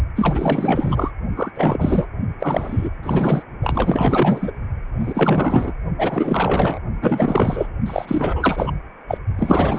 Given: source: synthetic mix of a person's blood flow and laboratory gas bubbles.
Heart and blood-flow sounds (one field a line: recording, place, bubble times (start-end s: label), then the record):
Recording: Doppler ultrasound of blood flow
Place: precordium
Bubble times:
0.15-1.11 s: bubbles
1.36-1.51 s: bubbles
1.54-2.06 s: bubbles
2.40-2.89 s: bubbles
3.02-3.42 s: bubbles
3.62-4.51 s: bubbles
5.00-5.73 s: bubbles
5.98-6.79 s: bubbles
7.02-7.67 s: bubbles
7.86-8.72 s: bubbles
9.07-9.18 s: bubbles
9.38-9.78 s: bubbles
From the record:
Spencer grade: 4 (maximum detectable bubble signal sounding continuously throughout systole and diastole of every cardiac period, and overriding the amplitude of the normal cardiac signals)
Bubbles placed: only in the low amplitude regions of the cardiac cycle